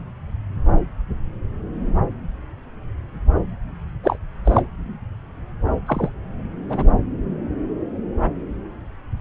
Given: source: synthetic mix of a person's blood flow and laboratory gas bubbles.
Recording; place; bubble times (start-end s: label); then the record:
Doppler ultrasound of blood flow; subclavian vein
4.03-4.18 s: bubbles
4.45-4.62 s: bubbles
5.86-6.10 s: bubbles
6.69-6.84 s: bubbles
From the record:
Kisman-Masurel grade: 123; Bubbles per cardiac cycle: 1 to 2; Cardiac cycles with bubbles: 10 to 50%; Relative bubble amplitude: loud (0.450 to 0.775); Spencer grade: 2 (many but less than half of the cardiac periods contain bubble signals, singularly or in groups); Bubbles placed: anywhere in the cardiac cycle